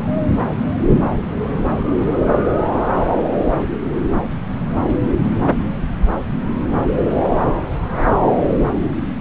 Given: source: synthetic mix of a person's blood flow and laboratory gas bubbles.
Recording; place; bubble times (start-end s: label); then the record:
Doppler ultrasound of blood flow; subclavian vein
0.00-0.04 s: bubbles
From the record:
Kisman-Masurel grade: 113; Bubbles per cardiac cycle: 1 to 2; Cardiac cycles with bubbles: 1 to 10%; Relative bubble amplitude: loud (0.450 to 0.775); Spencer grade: 1 (occasional bubble signal discernible with the cardiac motion signal, with majority of cardiac periods free of bubbles); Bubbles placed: anywhere in the cardiac cycle